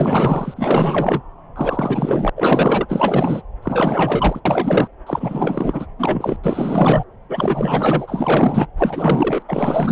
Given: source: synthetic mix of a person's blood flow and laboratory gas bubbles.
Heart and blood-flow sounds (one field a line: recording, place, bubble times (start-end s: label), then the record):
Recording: Doppler ultrasound of blood flow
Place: subclavian vein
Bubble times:
0.00-1.21 s: bubbles
1.55-2.29 s: bubbles
2.36-2.86 s: bubbles
2.88-3.42 s: bubbles
3.62-4.40 s: bubbles
4.45-4.88 s: bubbles
5.07-5.86 s: bubbles
5.99-6.37 s: bubbles
6.43-7.04 s: bubbles
7.29-8.67 s: bubbles
8.78-9.43 s: bubbles
9.47-9.92 s: bubbles
From the record:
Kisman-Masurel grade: 444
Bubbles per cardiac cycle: continuous sound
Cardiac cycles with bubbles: 100%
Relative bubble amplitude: maximal (0.775 to 0.999)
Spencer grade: 4 (maximum detectable bubble signal sounding continuously throughout systole and diastole of every cardiac period, and overriding the amplitude of the normal cardiac signals)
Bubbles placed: anywhere in the cardiac cycle